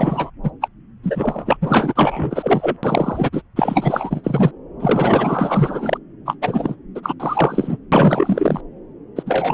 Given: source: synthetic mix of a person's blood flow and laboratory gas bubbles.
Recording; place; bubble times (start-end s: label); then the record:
Doppler ultrasound of blood flow; subclavian vein
0.00-0.30 s: bubbles
0.43-0.51 s: bubbles
0.61-0.68 s: bubbles
1.03-1.57 s: bubbles
1.61-2.77 s: bubbles
2.83-3.42 s: bubbles
3.56-4.51 s: bubbles
4.79-5.97 s: bubbles
6.25-6.35 s: bubbles
6.41-6.75 s: bubbles
6.95-7.14 s: bubbles
7.19-7.76 s: bubbles
7.92-8.61 s: bubbles
9.16-9.23 s: bubbles
9.26-9.54 s: bubbles
From the record:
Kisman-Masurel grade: 444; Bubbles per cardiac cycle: continuous sound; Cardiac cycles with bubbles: 100%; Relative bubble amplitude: maximal (0.775 to 0.999); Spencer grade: 4 (maximum detectable bubble signal sounding continuously throughout systole and diastole of every cardiac period, and overriding the amplitude of the normal cardiac signals); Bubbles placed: anywhere in the cardiac cycle